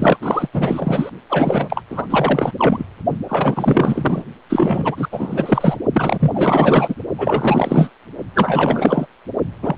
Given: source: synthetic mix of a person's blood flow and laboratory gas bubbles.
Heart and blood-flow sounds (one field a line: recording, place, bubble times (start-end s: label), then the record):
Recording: Doppler ultrasound of blood flow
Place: precordium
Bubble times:
0.00-0.49 s: bubbles
0.54-1.10 s: bubbles
1.29-1.82 s: bubbles
1.90-2.06 s: bubbles
2.10-2.52 s: bubbles
2.58-2.86 s: bubbles
3.29-4.23 s: bubbles
4.49-5.08 s: bubbles
5.12-5.77 s: bubbles
5.92-6.95 s: bubbles
7.18-7.91 s: bubbles
8.35-9.06 s: bubbles
9.62-9.78 s: bubbles
From the record:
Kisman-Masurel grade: 444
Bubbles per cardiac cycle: continuous sound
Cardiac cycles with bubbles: 100%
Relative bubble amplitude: maximal (0.775 to 0.999)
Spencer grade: 4 (maximum detectable bubble signal sounding continuously throughout systole and diastole of every cardiac period, and overriding the amplitude of the normal cardiac signals)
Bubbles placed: only in the low amplitude regions of the cardiac cycle